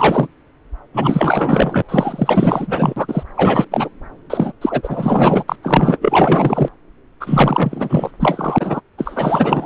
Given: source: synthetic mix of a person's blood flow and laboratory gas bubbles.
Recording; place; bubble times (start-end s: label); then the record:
Doppler ultrasound of blood flow; subclavian vein
0.00-0.27 s: bubbles
0.94-1.82 s: bubbles
1.89-3.23 s: bubbles
3.36-3.65 s: bubbles
3.70-3.89 s: bubbles
4.29-4.53 s: bubbles
4.61-5.44 s: bubbles
5.48-5.56 s: bubbles
5.62-5.98 s: bubbles
6.01-6.69 s: bubbles
7.20-8.11 s: bubbles
8.20-8.80 s: bubbles
8.98-9.66 s: bubbles
From the record:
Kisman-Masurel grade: 444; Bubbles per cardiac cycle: continuous sound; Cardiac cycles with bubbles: 100%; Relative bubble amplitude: maximal (0.775 to 0.999); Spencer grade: 4 (maximum detectable bubble signal sounding continuously throughout systole and diastole of every cardiac period, and overriding the amplitude of the normal cardiac signals); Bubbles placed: anywhere in the cardiac cycle